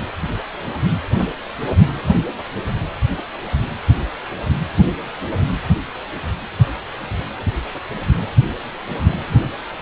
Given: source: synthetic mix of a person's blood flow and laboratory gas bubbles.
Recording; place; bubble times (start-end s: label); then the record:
Doppler ultrasound of blood flow; precordium
no bubbles
From the record:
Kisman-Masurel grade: 000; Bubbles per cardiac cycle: 0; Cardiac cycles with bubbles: 0%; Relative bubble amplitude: no bubbles discernible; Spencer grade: 0 (complete lack of bubble signals)